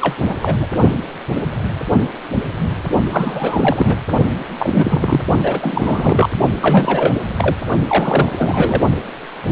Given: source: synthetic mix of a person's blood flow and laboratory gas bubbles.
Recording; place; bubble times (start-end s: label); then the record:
Doppler ultrasound of blood flow; precordium
0.01-0.17 s: bubbles
0.27-0.36 s: bubbles
0.41-0.67 s: bubbles
3.09-3.96 s: bubbles
4.58-5.25 s: bubbles
5.43-6.29 s: bubbles
6.62-7.14 s: bubbles
7.37-7.56 s: bubbles
7.86-8.33 s: bubbles
8.38-8.81 s: bubbles
From the record:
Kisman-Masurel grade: 332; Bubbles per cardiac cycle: rolling drumbeat, 9 or more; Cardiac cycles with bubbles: 50 to 99%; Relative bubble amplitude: moderate (0.250 to 0.450); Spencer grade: 3 (all of the cardiac periods contain showers or single bubble signals, but not dominating or overriding the cardiac motion signals); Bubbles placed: only in the low amplitude regions of the cardiac cycle